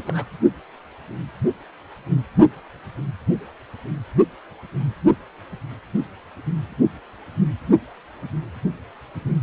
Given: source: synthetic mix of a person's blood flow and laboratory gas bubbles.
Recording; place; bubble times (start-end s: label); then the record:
Doppler ultrasound of blood flow; precordium
0.00-0.25 s: bubbles
From the record:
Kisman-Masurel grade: 211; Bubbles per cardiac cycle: several, 3 to 8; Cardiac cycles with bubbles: 1 to 10%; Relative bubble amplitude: barely perceptible (0.100 to 0.250); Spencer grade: 1 (occasional bubble signal discernible with the cardiac motion signal, with majority of cardiac periods free of bubbles); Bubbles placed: only in the low amplitude regions of the cardiac cycle